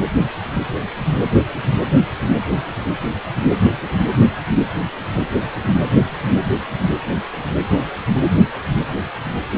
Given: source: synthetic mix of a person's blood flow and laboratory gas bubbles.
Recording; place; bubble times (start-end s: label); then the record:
Doppler ultrasound of blood flow; precordium
no bubbles
From the record:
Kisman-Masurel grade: 000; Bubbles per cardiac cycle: 0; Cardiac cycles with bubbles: 0%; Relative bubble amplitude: no bubbles discernible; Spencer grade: 0 (complete lack of bubble signals)